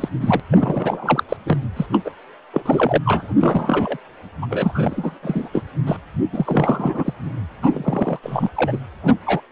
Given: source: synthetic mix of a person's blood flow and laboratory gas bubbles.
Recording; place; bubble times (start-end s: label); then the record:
Doppler ultrasound of blood flow; precordium
0.00-0.08 s: bubbles
0.21-0.40 s: bubbles
0.51-1.23 s: bubbles
1.29-1.36 s: bubbles
1.45-1.58 s: bubbles
1.76-1.86 s: bubbles
1.92-2.01 s: bubbles
2.04-2.11 s: bubbles
2.53-2.62 s: bubbles
2.65-2.98 s: bubbles
3.05-3.35 s: bubbles
3.39-3.98 s: bubbles
4.42-4.47 s: bubbles
4.50-5.19 s: bubbles
5.22-5.49 s: bubbles
5.53-5.62 s: bubbles
5.86-5.97 s: bubbles
6.32-7.14 s: bubbles
7.63-7.70 s: bubbles
7.73-8.19 s: bubbles
8.22-8.49 s: bubbles
8.55-8.79 s: bubbles
9.03-9.13 s: bubbles
9.25-9.41 s: bubbles
From the record:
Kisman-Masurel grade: 343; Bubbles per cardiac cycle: rolling drumbeat, 9 or more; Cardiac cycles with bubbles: 100%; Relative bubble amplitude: loud (0.450 to 0.775); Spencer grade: 3 (all of the cardiac periods contain showers or single bubble signals, but not dominating or overriding the cardiac motion signals); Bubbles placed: anywhere in the cardiac cycle